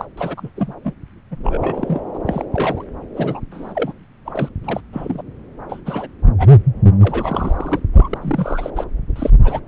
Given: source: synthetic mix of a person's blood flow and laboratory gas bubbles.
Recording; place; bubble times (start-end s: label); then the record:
Doppler ultrasound of blood flow; subclavian vein
0.00-0.05 s: bubbles
0.17-0.49 s: bubbles
0.56-0.73 s: bubbles
0.83-0.93 s: bubbles
1.31-1.36 s: bubbles
1.44-2.00 s: bubbles
2.13-2.17 s: bubbles
2.26-2.45 s: bubbles
2.52-2.84 s: bubbles
3.14-3.41 s: bubbles
3.51-3.93 s: bubbles
4.25-4.49 s: bubbles
4.63-4.80 s: bubbles
4.92-5.22 s: bubbles
5.69-5.80 s: bubbles
5.85-6.08 s: bubbles
6.38-6.56 s: bubbles
7.00-7.80 s: bubbles
7.93-8.18 s: bubbles
8.21-8.70 s: bubbles
8.75-8.85 s: bubbles
9.15-9.30 s: bubbles
9.44-9.60 s: bubbles
From the record:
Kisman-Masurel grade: 242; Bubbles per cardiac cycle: several, 3 to 8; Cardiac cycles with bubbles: 100%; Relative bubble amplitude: moderate (0.250 to 0.450); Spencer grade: 3 (all of the cardiac periods contain showers or single bubble signals, but not dominating or overriding the cardiac motion signals); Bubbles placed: anywhere in the cardiac cycle